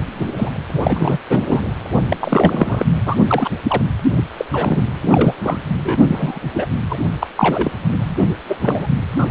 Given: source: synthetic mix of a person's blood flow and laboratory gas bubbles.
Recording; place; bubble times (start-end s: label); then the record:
Doppler ultrasound of blood flow; precordium
0.15-0.33 s: bubbles
0.37-0.62 s: bubbles
0.73-0.80 s: bubbles
0.83-1.18 s: bubbles
1.30-1.39 s: bubbles
1.49-1.62 s: bubbles
2.08-2.17 s: bubbles
2.21-2.86 s: bubbles
3.06-3.15 s: bubbles
3.28-3.49 s: bubbles
3.69-3.83 s: bubbles
4.16-4.24 s: bubbles
4.37-4.45 s: bubbles
4.52-4.83 s: bubbles
5.02-5.34 s: bubbles
5.43-5.58 s: bubbles
5.83-6.00 s: bubbles
6.07-6.40 s: bubbles
6.54-6.66 s: bubbles
6.88-6.99 s: bubbles
7.20-7.27 s: bubbles
7.37-7.71 s: bubbles
7.93-8.13 s: bubbles
8.48-8.56 s: bubbles
8.61-8.87 s: bubbles
9.13-9.31 s: bubbles
From the record:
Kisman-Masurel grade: 243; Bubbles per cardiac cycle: several, 3 to 8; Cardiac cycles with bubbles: 100%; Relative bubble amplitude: loud (0.450 to 0.775); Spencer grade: 3 (all of the cardiac periods contain showers or single bubble signals, but not dominating or overriding the cardiac motion signals); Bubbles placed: anywhere in the cardiac cycle